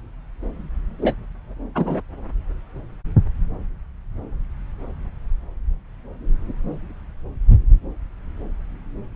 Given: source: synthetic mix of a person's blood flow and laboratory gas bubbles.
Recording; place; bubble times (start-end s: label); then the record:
Doppler ultrasound of blood flow; subclavian vein
1.01-1.14 s: bubbles
1.75-2.01 s: bubbles
From the record:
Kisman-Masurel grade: 113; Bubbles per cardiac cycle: 1 to 2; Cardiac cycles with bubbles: 1 to 10%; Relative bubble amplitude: loud (0.450 to 0.775); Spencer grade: 1 (occasional bubble signal discernible with the cardiac motion signal, with majority of cardiac periods free of bubbles); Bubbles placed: anywhere in the cardiac cycle